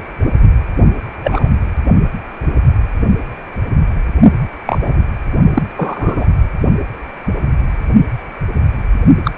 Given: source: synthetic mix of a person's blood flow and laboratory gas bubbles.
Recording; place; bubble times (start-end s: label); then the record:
Doppler ultrasound of blood flow; precordium
1.24-1.49 s: bubbles
4.66-5.03 s: bubbles
5.54-5.62 s: bubbles
5.76-6.26 s: bubbles
9.24-9.31 s: bubbles
From the record:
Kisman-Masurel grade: 123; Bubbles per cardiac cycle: 1 to 2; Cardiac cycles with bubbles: 10 to 50%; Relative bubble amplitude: loud (0.450 to 0.775); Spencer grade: 2 (many but less than half of the cardiac periods contain bubble signals, singularly or in groups); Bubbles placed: only in the low amplitude regions of the cardiac cycle